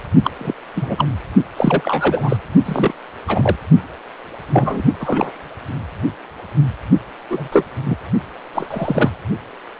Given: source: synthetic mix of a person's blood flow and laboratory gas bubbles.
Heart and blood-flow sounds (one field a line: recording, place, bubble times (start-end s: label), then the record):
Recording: Doppler ultrasound of blood flow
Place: precordium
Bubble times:
0.24-0.31 s: bubbles
0.39-0.54 s: bubbles
0.76-1.07 s: bubbles
1.56-2.36 s: bubbles
2.65-2.92 s: bubbles
3.27-3.56 s: bubbles
4.53-4.82 s: bubbles
5.00-5.40 s: bubbles
7.30-7.49 s: bubbles
7.52-7.66 s: bubbles
7.86-7.96 s: bubbles
8.54-8.67 s: bubbles
8.71-9.11 s: bubbles
From the record:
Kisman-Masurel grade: 233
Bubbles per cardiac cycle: several, 3 to 8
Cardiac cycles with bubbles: 50 to 99%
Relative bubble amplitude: loud (0.450 to 0.775)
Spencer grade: 3 (all of the cardiac periods contain showers or single bubble signals, but not dominating or overriding the cardiac motion signals)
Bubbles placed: only in the low amplitude regions of the cardiac cycle